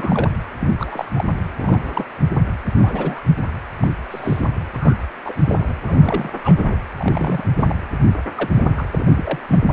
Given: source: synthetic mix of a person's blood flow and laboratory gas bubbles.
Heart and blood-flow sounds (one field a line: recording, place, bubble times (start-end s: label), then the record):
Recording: Doppler ultrasound of blood flow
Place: precordium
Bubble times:
0.00-0.30 s: bubbles
0.60-0.69 s: bubbles
0.78-1.05 s: bubbles
1.16-1.25 s: bubbles
1.58-2.03 s: bubbles
2.72-3.23 s: bubbles
3.81-3.88 s: bubbles
4.10-4.48 s: bubbles
4.72-4.96 s: bubbles
5.25-5.33 s: bubbles
5.46-5.73 s: bubbles
5.88-6.29 s: bubbles
6.43-6.76 s: bubbles
6.98-7.76 s: bubbles
8.35-8.49 s: bubbles
8.52-8.64 s: bubbles
8.77-8.87 s: bubbles
8.91-9.40 s: bubbles
9.48-9.73 s: bubbles
From the record:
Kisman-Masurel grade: 242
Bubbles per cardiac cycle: several, 3 to 8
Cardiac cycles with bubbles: 100%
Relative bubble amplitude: moderate (0.250 to 0.450)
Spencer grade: 3 (all of the cardiac periods contain showers or single bubble signals, but not dominating or overriding the cardiac motion signals)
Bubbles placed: anywhere in the cardiac cycle